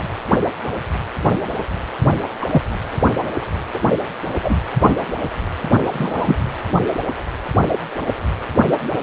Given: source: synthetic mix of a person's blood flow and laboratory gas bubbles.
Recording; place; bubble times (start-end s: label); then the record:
Doppler ultrasound of blood flow; precordium
2.42-2.46 s: bubbles
2.51-2.61 s: bubbles
3.74-3.80 s: bubbles
4.44-4.56 s: bubbles
4.80-4.94 s: bubbles
5.93-6.35 s: bubbles
From the record:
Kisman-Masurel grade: 123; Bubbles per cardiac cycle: 1 to 2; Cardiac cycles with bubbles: 10 to 50%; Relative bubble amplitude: loud (0.450 to 0.775); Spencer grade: 2 (many but less than half of the cardiac periods contain bubble signals, singularly or in groups); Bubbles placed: anywhere in the cardiac cycle